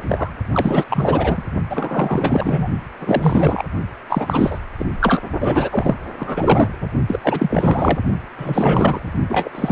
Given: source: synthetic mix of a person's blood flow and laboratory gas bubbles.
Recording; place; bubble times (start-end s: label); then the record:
Doppler ultrasound of blood flow; precordium
0.03-0.35 s: bubbles
0.53-0.84 s: bubbles
0.89-1.44 s: bubbles
1.70-2.67 s: bubbles
3.00-3.63 s: bubbles
4.08-4.59 s: bubbles
4.79-4.85 s: bubbles
5.00-5.20 s: bubbles
5.40-5.95 s: bubbles
6.18-6.69 s: bubbles
6.80-6.88 s: bubbles
7.06-7.19 s: bubbles
7.23-7.98 s: bubbles
8.38-9.14 s: bubbles
9.28-9.49 s: bubbles
9.54-9.72 s: bubbles
From the record:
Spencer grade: 4 (maximum detectable bubble signal sounding continuously throughout systole and diastole of every cardiac period, and overriding the amplitude of the normal cardiac signals); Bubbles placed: only in the low amplitude regions of the cardiac cycle